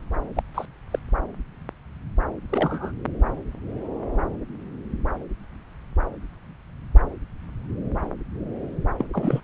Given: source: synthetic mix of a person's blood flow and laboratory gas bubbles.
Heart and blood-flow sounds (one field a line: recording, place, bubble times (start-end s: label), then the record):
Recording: Doppler ultrasound of blood flow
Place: subclavian vein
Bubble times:
0.35-0.43 s: bubbles
0.54-0.65 s: bubbles
0.91-0.99 s: bubbles
2.50-2.92 s: bubbles
8.98-9.05 s: bubbles
9.13-9.40 s: bubbles
From the record:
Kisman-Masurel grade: 222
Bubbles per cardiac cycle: several, 3 to 8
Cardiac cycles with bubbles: 10 to 50%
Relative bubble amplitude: moderate (0.250 to 0.450)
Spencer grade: 2 (many but less than half of the cardiac periods contain bubble signals, singularly or in groups)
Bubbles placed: anywhere in the cardiac cycle